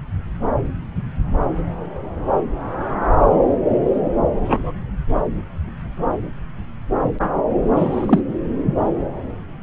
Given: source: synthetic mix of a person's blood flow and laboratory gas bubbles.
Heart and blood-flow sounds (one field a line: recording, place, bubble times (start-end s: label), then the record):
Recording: Doppler ultrasound of blood flow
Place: subclavian vein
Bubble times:
4.47-4.71 s: bubbles
7.76-8.21 s: bubbles
From the record:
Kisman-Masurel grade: 123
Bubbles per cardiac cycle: 1 to 2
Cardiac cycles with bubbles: 10 to 50%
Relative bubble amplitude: loud (0.450 to 0.775)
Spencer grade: 2 (many but less than half of the cardiac periods contain bubble signals, singularly or in groups)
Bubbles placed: anywhere in the cardiac cycle